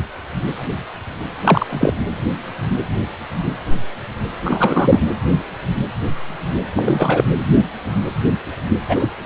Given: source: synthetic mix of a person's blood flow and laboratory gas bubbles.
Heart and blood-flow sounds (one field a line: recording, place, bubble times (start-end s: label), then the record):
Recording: Doppler ultrasound of blood flow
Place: precordium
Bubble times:
1.44-1.66 s: bubbles
1.69-1.94 s: bubbles
4.45-5.04 s: bubbles
6.75-7.24 s: bubbles
8.88-8.96 s: bubbles
8.99-9.12 s: bubbles
9.22-9.26 s: bubbles
From the record:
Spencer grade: 2 (many but less than half of the cardiac periods contain bubble signals, singularly or in groups)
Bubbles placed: anywhere in the cardiac cycle